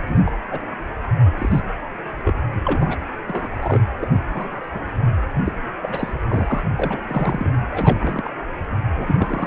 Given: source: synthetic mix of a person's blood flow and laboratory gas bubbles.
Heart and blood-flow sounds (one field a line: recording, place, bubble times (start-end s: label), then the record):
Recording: Doppler ultrasound of blood flow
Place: precordium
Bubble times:
0.00-0.32 s: bubbles
0.51-0.59 s: bubbles
1.38-1.60 s: bubbles
2.25-2.34 s: bubbles
2.65-2.96 s: bubbles
3.27-3.48 s: bubbles
3.56-3.80 s: bubbles
4.00-4.07 s: bubbles
4.25-4.61 s: bubbles
4.72-4.85 s: bubbles
5.44-5.54 s: bubbles
5.82-6.14 s: bubbles
6.27-6.61 s: bubbles
6.76-7.00 s: bubbles
7.08-7.50 s: bubbles
7.72-8.33 s: bubbles
8.95-9.47 s: bubbles
From the record:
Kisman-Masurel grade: 242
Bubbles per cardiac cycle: several, 3 to 8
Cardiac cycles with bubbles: 100%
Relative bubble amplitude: moderate (0.250 to 0.450)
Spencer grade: 3 (all of the cardiac periods contain showers or single bubble signals, but not dominating or overriding the cardiac motion signals)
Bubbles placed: anywhere in the cardiac cycle